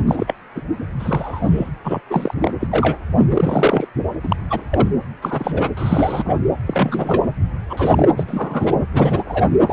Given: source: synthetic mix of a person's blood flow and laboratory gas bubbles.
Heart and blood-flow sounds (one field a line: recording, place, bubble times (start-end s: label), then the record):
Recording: Doppler ultrasound of blood flow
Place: precordium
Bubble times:
0.07-0.34 s: bubbles
0.55-0.61 s: bubbles
0.99-1.71 s: bubbles
1.84-2.00 s: bubbles
2.10-2.34 s: bubbles
2.41-2.54 s: bubbles
2.60-2.99 s: bubbles
3.18-3.26 s: bubbles
3.31-3.87 s: bubbles
4.23-4.36 s: bubbles
4.50-4.61 s: bubbles
4.71-4.88 s: bubbles
5.22-5.70 s: bubbles
5.76-6.38 s: bubbles
6.67-7.23 s: bubbles
7.69-8.08 s: bubbles
8.16-8.75 s: bubbles
8.94-9.44 s: bubbles
9.66-9.73 s: bubbles
From the record:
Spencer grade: 3 (all of the cardiac periods contain showers or single bubble signals, but not dominating or overriding the cardiac motion signals)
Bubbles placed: anywhere in the cardiac cycle